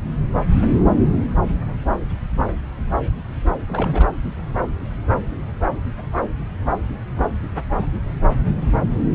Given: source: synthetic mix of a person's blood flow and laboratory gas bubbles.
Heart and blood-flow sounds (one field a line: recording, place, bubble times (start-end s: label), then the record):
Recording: Doppler ultrasound of blood flow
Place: subclavian vein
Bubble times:
3.68-4.06 s: bubbles
From the record:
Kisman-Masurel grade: 221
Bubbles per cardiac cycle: several, 3 to 8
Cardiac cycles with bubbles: 10 to 50%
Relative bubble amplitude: barely perceptible (0.100 to 0.250)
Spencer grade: 2 (many but less than half of the cardiac periods contain bubble signals, singularly or in groups)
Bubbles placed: anywhere in the cardiac cycle